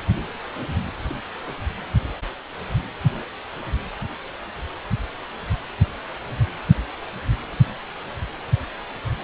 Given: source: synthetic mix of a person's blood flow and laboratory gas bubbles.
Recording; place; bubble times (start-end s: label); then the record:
Doppler ultrasound of blood flow; precordium
no bubbles
From the record:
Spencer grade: 0 (complete lack of bubble signals)